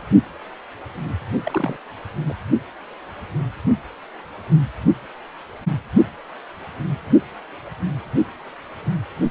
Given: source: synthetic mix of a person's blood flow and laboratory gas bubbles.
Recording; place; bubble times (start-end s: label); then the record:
Doppler ultrasound of blood flow; precordium
1.45-1.77 s: bubbles
2.28-2.33 s: bubbles
From the record:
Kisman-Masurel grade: 212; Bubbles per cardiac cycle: several, 3 to 8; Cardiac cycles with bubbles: 1 to 10%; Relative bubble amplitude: moderate (0.250 to 0.450); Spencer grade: 1 (occasional bubble signal discernible with the cardiac motion signal, with majority of cardiac periods free of bubbles); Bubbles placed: only in the low amplitude regions of the cardiac cycle